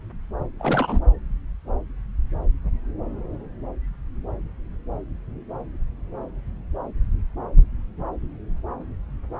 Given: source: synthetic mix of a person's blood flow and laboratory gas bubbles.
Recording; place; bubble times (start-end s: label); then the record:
Doppler ultrasound of blood flow; subclavian vein
0.59-0.99 s: bubbles
From the record:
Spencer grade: 1 (occasional bubble signal discernible with the cardiac motion signal, with majority of cardiac periods free of bubbles); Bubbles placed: anywhere in the cardiac cycle